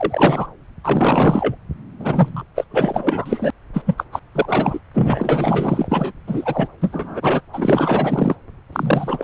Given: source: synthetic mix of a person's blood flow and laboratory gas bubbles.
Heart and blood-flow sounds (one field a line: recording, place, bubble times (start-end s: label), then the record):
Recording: Doppler ultrasound of blood flow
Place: subclavian vein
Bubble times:
0.00-0.47 s: bubbles
0.84-1.56 s: bubbles
2.00-2.43 s: bubbles
2.55-2.65 s: bubbles
2.71-3.51 s: bubbles
3.73-3.82 s: bubbles
3.85-3.94 s: bubbles
3.97-4.04 s: bubbles
4.12-4.19 s: bubbles
4.34-4.79 s: bubbles
4.94-6.11 s: bubbles
6.27-6.67 s: bubbles
6.81-7.43 s: bubbles
7.52-8.36 s: bubbles
8.72-9.24 s: bubbles
From the record:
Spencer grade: 4 (maximum detectable bubble signal sounding continuously throughout systole and diastole of every cardiac period, and overriding the amplitude of the normal cardiac signals)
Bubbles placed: anywhere in the cardiac cycle